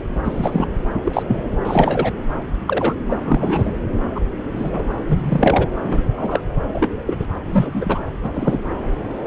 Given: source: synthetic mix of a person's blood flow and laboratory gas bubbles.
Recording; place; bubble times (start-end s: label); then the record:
Doppler ultrasound of blood flow; subclavian vein
0.25-0.68 s: bubbles
1.05-1.23 s: bubbles
1.28-1.43 s: bubbles
1.65-2.12 s: bubbles
2.67-2.94 s: bubbles
3.10-3.20 s: bubbles
3.25-3.73 s: bubbles
4.15-4.20 s: bubbles
4.56-4.83 s: bubbles
5.08-5.68 s: bubbles
5.84-6.03 s: bubbles
6.17-6.41 s: bubbles
6.72-6.89 s: bubbles
7.07-7.16 s: bubbles
7.19-7.28 s: bubbles
7.45-8.04 s: bubbles
8.22-8.60 s: bubbles
From the record:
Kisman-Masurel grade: 233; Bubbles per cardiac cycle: several, 3 to 8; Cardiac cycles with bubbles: 50 to 99%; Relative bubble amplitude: loud (0.450 to 0.775); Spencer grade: 3 (all of the cardiac periods contain showers or single bubble signals, but not dominating or overriding the cardiac motion signals); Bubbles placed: anywhere in the cardiac cycle